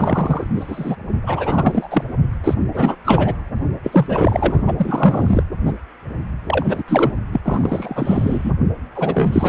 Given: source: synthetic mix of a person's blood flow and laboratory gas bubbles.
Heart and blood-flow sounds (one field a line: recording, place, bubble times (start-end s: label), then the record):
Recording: Doppler ultrasound of blood flow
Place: precordium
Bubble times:
0.00-0.47 s: bubbles
0.55-0.96 s: bubbles
1.24-2.04 s: bubbles
2.43-2.54 s: bubbles
2.74-2.96 s: bubbles
3.04-3.38 s: bubbles
3.83-4.63 s: bubbles
4.67-4.73 s: bubbles
4.77-5.43 s: bubbles
5.65-5.72 s: bubbles
6.46-6.83 s: bubbles
6.88-7.14 s: bubbles
7.32-7.40 s: bubbles
7.43-8.52 s: bubbles
8.95-9.49 s: bubbles
From the record:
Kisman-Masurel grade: 343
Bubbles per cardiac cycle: rolling drumbeat, 9 or more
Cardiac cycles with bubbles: 100%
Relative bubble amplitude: loud (0.450 to 0.775)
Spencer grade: 3 (all of the cardiac periods contain showers or single bubble signals, but not dominating or overriding the cardiac motion signals)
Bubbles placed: only in the low amplitude regions of the cardiac cycle